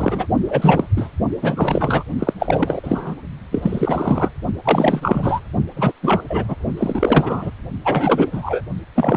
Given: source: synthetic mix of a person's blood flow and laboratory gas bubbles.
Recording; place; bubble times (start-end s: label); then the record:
Doppler ultrasound of blood flow; precordium
0.00-0.27 s: bubbles
0.48-0.84 s: bubbles
0.96-1.09 s: bubbles
1.42-2.04 s: bubbles
2.19-2.33 s: bubbles
2.39-3.15 s: bubbles
3.51-4.30 s: bubbles
4.63-5.40 s: bubbles
5.76-5.92 s: bubbles
6.02-6.21 s: bubbles
6.29-6.44 s: bubbles
6.48-6.55 s: bubbles
6.77-7.51 s: bubbles
7.84-8.61 s: bubbles
8.95-9.17 s: bubbles
From the record:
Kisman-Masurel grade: 343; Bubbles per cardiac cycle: rolling drumbeat, 9 or more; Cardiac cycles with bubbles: 100%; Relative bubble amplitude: loud (0.450 to 0.775); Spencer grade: 3 (all of the cardiac periods contain showers or single bubble signals, but not dominating or overriding the cardiac motion signals); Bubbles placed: only in the low amplitude regions of the cardiac cycle